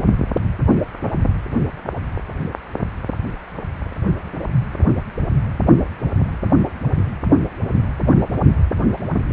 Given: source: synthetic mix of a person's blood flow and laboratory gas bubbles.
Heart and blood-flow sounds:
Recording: Doppler ultrasound of blood flow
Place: precordium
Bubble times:
no bubbles
From the record:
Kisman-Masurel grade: 000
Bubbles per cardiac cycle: 0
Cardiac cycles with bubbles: 0%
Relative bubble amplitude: no bubbles discernible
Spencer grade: 0 (complete lack of bubble signals)

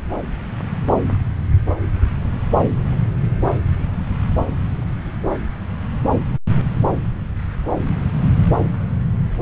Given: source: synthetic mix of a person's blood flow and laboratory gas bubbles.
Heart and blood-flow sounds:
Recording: Doppler ultrasound of blood flow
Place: subclavian vein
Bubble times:
no bubbles
From the record:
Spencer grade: 0 (complete lack of bubble signals)

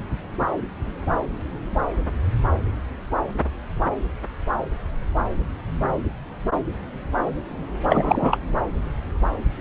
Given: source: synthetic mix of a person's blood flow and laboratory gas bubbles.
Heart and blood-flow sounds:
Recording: Doppler ultrasound of blood flow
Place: subclavian vein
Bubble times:
7.89-8.38 s: bubbles
From the record:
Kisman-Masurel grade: 213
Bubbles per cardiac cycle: several, 3 to 8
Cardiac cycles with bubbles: 1 to 10%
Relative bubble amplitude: loud (0.450 to 0.775)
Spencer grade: 1 (occasional bubble signal discernible with the cardiac motion signal, with majority of cardiac periods free of bubbles)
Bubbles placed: anywhere in the cardiac cycle

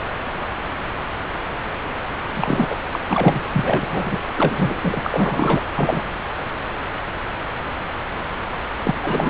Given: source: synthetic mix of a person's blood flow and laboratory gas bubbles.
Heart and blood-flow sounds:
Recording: Doppler ultrasound of blood flow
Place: subclavian vein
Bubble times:
2.36-2.75 s: bubbles
2.92-2.99 s: bubbles
3.09-3.43 s: bubbles
3.53-4.18 s: bubbles
4.36-5.00 s: bubbles
5.04-5.63 s: bubbles
5.75-6.04 s: bubbles
8.83-8.94 s: bubbles
9.03-9.30 s: bubbles
From the record:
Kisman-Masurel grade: 223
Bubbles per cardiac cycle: several, 3 to 8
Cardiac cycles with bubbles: 10 to 50%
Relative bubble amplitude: loud (0.450 to 0.775)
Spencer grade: 2 (many but less than half of the cardiac periods contain bubble signals, singularly or in groups)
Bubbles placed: anywhere in the cardiac cycle

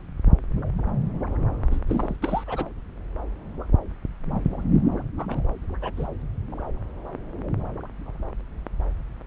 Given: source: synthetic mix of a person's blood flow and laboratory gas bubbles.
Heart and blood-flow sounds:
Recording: Doppler ultrasound of blood flow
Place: subclavian vein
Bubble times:
1.71-1.79 s: bubbles
1.87-2.16 s: bubbles
2.21-2.69 s: bubbles
5.17-5.26 s: bubbles
5.29-5.46 s: bubbles
5.81-5.92 s: bubbles
5.96-6.08 s: bubbles
From the record:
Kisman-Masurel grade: 221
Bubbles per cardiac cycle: several, 3 to 8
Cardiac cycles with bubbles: 10 to 50%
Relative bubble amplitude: barely perceptible (0.100 to 0.250)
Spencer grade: 2 (many but less than half of the cardiac periods contain bubble signals, singularly or in groups)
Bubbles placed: anywhere in the cardiac cycle

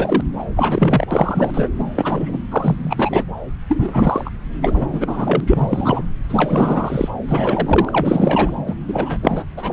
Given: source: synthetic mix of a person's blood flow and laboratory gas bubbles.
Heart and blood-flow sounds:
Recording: Doppler ultrasound of blood flow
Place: subclavian vein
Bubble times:
0.00-0.21 s: bubbles
0.39-0.44 s: bubbles
0.56-1.06 s: bubbles
1.10-1.69 s: bubbles
1.79-1.84 s: bubbles
1.95-2.38 s: bubbles
2.51-3.24 s: bubbles
3.69-4.30 s: bubbles
4.62-4.87 s: bubbles
4.92-5.41 s: bubbles
5.46-6.02 s: bubbles
6.29-7.08 s: bubbles
7.29-8.54 s: bubbles
8.67-8.74 s: bubbles
8.88-9.17 s: bubbles
9.22-9.44 s: bubbles
9.56-9.73 s: bubbles
From the record:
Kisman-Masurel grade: 343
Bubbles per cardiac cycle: rolling drumbeat, 9 or more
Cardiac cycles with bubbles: 100%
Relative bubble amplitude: loud (0.450 to 0.775)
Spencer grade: 3 (all of the cardiac periods contain showers or single bubble signals, but not dominating or overriding the cardiac motion signals)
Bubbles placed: anywhere in the cardiac cycle

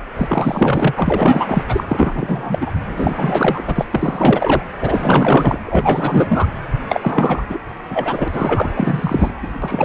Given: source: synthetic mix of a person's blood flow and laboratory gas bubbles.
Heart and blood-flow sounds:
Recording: Doppler ultrasound of blood flow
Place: precordium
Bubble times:
0.16-0.94 s: bubbles
0.96-1.64 s: bubbles
1.68-1.83 s: bubbles
1.88-2.72 s: bubbles
2.89-3.62 s: bubbles
3.66-3.86 s: bubbles
3.90-4.62 s: bubbles
4.81-5.59 s: bubbles
5.66-6.46 s: bubbles
6.88-7.43 s: bubbles
7.49-7.59 s: bubbles
7.90-8.28 s: bubbles
8.32-8.70 s: bubbles
8.76-9.31 s: bubbles
9.42-9.59 s: bubbles
9.62-9.84 s: bubbles
From the record:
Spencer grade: 4 (maximum detectable bubble signal sounding continuously throughout systole and diastole of every cardiac period, and overriding the amplitude of the normal cardiac signals)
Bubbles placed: anywhere in the cardiac cycle

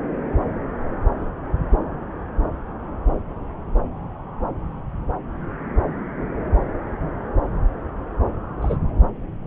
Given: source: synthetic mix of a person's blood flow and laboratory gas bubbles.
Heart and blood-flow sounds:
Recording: Doppler ultrasound of blood flow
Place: subclavian vein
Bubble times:
8.62-8.77 s: bubbles
From the record:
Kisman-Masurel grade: 112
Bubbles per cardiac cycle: 1 to 2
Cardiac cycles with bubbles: 1 to 10%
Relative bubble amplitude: moderate (0.250 to 0.450)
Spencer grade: 1 (occasional bubble signal discernible with the cardiac motion signal, with majority of cardiac periods free of bubbles)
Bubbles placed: anywhere in the cardiac cycle

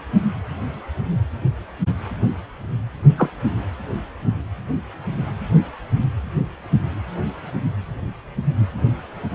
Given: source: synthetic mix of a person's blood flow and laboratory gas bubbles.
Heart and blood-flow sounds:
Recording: Doppler ultrasound of blood flow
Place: precordium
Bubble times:
3.17-3.30 s: bubbles
From the record:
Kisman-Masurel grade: 122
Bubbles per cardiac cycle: 1 to 2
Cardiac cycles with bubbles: 10 to 50%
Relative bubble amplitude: moderate (0.250 to 0.450)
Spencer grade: 2 (many but less than half of the cardiac periods contain bubble signals, singularly or in groups)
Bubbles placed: anywhere in the cardiac cycle

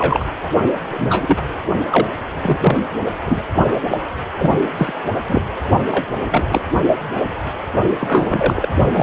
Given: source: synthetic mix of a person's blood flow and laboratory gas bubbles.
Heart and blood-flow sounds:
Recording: Doppler ultrasound of blood flow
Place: precordium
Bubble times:
0.00-0.24 s: bubbles
0.66-0.71 s: bubbles
0.90-1.36 s: bubbles
1.91-2.07 s: bubbles
2.42-2.79 s: bubbles
3.25-3.42 s: bubbles
3.92-3.98 s: bubbles
4.38-4.68 s: bubbles
4.77-4.93 s: bubbles
5.27-5.41 s: bubbles
5.91-6.07 s: bubbles
6.31-6.59 s: bubbles
7.99-8.67 s: bubbles
8.92-9.03 s: bubbles
From the record:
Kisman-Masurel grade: 243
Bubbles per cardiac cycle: several, 3 to 8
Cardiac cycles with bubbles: 100%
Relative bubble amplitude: loud (0.450 to 0.775)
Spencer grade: 3 (all of the cardiac periods contain showers or single bubble signals, but not dominating or overriding the cardiac motion signals)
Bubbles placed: only in the low amplitude regions of the cardiac cycle

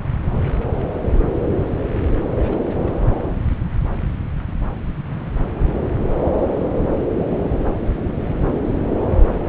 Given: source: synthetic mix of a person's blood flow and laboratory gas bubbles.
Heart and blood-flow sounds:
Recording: Doppler ultrasound of blood flow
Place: subclavian vein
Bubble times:
2.37-2.94 s: bubbles
From the record:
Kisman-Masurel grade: 211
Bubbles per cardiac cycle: several, 3 to 8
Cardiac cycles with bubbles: 1 to 10%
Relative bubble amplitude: barely perceptible (0.100 to 0.250)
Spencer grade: 1 (occasional bubble signal discernible with the cardiac motion signal, with majority of cardiac periods free of bubbles)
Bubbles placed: anywhere in the cardiac cycle

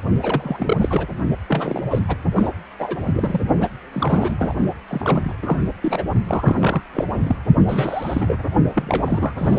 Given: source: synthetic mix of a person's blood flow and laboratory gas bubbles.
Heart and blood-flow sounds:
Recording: Doppler ultrasound of blood flow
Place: precordium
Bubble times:
0.20-0.77 s: bubbles
0.80-1.07 s: bubbles
1.48-1.86 s: bubbles
1.90-2.04 s: bubbles
2.08-2.17 s: bubbles
2.35-2.50 s: bubbles
2.79-3.41 s: bubbles
3.60-3.68 s: bubbles
3.92-4.36 s: bubbles
4.38-4.54 s: bubbles
4.88-5.35 s: bubbles
5.42-5.58 s: bubbles
5.82-6.03 s: bubbles
6.27-6.82 s: bubbles
6.93-7.05 s: bubbles
7.13-7.36 s: bubbles
7.69-8.36 s: bubbles
8.76-9.59 s: bubbles
From the record:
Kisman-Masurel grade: 342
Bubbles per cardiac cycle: rolling drumbeat, 9 or more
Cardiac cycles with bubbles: 100%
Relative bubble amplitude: moderate (0.250 to 0.450)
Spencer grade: 3 (all of the cardiac periods contain showers or single bubble signals, but not dominating or overriding the cardiac motion signals)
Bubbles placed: only in the low amplitude regions of the cardiac cycle

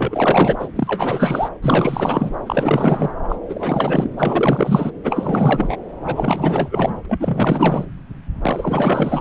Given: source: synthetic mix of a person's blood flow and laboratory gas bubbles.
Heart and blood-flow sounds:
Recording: Doppler ultrasound of blood flow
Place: subclavian vein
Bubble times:
0.00-0.56 s: bubbles
0.59-0.68 s: bubbles
0.76-1.50 s: bubbles
1.62-2.30 s: bubbles
2.46-3.11 s: bubbles
3.29-3.37 s: bubbles
3.48-4.11 s: bubbles
4.18-4.91 s: bubbles
5.03-5.77 s: bubbles
6.03-7.02 s: bubbles
7.04-7.86 s: bubbles
8.41-9.21 s: bubbles
From the record:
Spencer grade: 4 (maximum detectable bubble signal sounding continuously throughout systole and diastole of every cardiac period, and overriding the amplitude of the normal cardiac signals)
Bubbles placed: anywhere in the cardiac cycle

